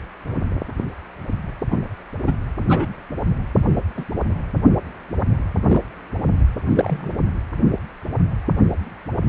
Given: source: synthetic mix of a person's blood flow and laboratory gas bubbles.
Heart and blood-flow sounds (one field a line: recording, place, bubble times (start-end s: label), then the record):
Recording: Doppler ultrasound of blood flow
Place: precordium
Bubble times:
1.70-1.78 s: bubbles
2.26-2.33 s: bubbles
2.69-2.94 s: bubbles
3.97-4.04 s: bubbles
5.68-5.81 s: bubbles
6.69-7.12 s: bubbles
From the record:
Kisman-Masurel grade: 122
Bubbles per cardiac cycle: 1 to 2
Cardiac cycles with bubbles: 10 to 50%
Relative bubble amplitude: moderate (0.250 to 0.450)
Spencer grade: 2 (many but less than half of the cardiac periods contain bubble signals, singularly or in groups)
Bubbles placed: anywhere in the cardiac cycle